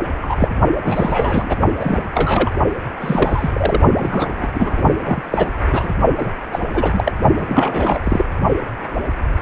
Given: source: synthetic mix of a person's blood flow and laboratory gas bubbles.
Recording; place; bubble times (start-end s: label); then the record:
Doppler ultrasound of blood flow; precordium
0.22-0.48 s: bubbles
0.82-1.58 s: bubbles
1.79-2.04 s: bubbles
2.14-2.50 s: bubbles
3.01-3.50 s: bubbles
3.53-3.81 s: bubbles
3.99-4.50 s: bubbles
4.54-4.81 s: bubbles
4.96-5.53 s: bubbles
5.72-5.92 s: bubbles
6.19-6.32 s: bubbles
6.53-6.61 s: bubbles
6.74-7.12 s: bubbles
7.37-8.00 s: bubbles
8.04-8.26 s: bubbles
From the record:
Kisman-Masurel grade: 233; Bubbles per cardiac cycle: several, 3 to 8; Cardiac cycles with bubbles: 50 to 99%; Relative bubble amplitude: loud (0.450 to 0.775); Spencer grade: 3 (all of the cardiac periods contain showers or single bubble signals, but not dominating or overriding the cardiac motion signals); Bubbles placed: only in the low amplitude regions of the cardiac cycle